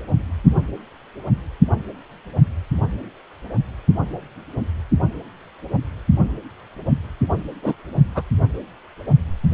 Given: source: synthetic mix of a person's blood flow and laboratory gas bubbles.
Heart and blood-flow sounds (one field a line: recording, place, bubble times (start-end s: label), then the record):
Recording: Doppler ultrasound of blood flow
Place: precordium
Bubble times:
7.62-7.75 s: bubbles
8.15-8.23 s: bubbles
From the record:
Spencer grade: 1 (occasional bubble signal discernible with the cardiac motion signal, with majority of cardiac periods free of bubbles)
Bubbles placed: anywhere in the cardiac cycle